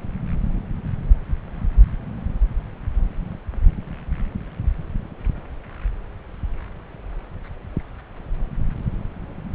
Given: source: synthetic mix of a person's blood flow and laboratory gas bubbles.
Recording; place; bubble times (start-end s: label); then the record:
Doppler ultrasound of blood flow; subclavian vein
no bubbles
From the record:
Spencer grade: 0 (complete lack of bubble signals)